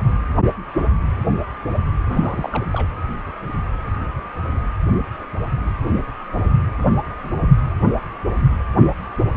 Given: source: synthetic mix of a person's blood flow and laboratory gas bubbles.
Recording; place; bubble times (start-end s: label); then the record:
Doppler ultrasound of blood flow; precordium
2.08-2.66 s: bubbles
2.71-2.88 s: bubbles
From the record:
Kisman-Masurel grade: 211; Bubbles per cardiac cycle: several, 3 to 8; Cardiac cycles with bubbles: 1 to 10%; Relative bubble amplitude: barely perceptible (0.100 to 0.250); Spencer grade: 1 (occasional bubble signal discernible with the cardiac motion signal, with majority of cardiac periods free of bubbles); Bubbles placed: anywhere in the cardiac cycle